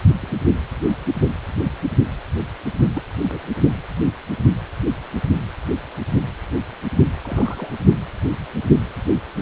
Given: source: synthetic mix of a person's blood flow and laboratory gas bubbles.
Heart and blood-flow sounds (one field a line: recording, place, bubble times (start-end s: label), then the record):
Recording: Doppler ultrasound of blood flow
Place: precordium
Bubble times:
0.21-0.37 s: bubbles
2.94-3.02 s: bubbles
3.29-3.39 s: bubbles
7.22-7.70 s: bubbles
From the record:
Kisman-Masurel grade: 121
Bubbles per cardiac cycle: 1 to 2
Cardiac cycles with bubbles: 10 to 50%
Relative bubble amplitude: barely perceptible (0.100 to 0.250)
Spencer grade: 2 (many but less than half of the cardiac periods contain bubble signals, singularly or in groups)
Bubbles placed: only in the low amplitude regions of the cardiac cycle